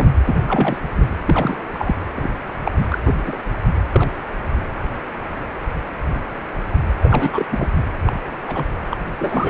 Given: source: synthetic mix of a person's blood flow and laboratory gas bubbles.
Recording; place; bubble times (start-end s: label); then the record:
Doppler ultrasound of blood flow; precordium
0.00-0.12 s: bubbles
0.25-0.37 s: bubbles
0.42-0.78 s: bubbles
0.95-1.08 s: bubbles
1.27-1.56 s: bubbles
1.73-1.96 s: bubbles
2.16-2.32 s: bubbles
2.63-2.71 s: bubbles
2.76-2.98 s: bubbles
3.04-3.16 s: bubbles
3.25-3.37 s: bubbles
3.92-4.09 s: bubbles
7.01-7.46 s: bubbles
7.50-7.67 s: bubbles
8.06-8.12 s: bubbles
8.48-8.76 s: bubbles
8.90-8.97 s: bubbles
9.19-9.50 s: bubbles
From the record:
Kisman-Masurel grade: 232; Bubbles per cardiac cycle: several, 3 to 8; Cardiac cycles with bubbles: 50 to 99%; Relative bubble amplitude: moderate (0.250 to 0.450); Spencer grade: 3 (all of the cardiac periods contain showers or single bubble signals, but not dominating or overriding the cardiac motion signals); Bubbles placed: anywhere in the cardiac cycle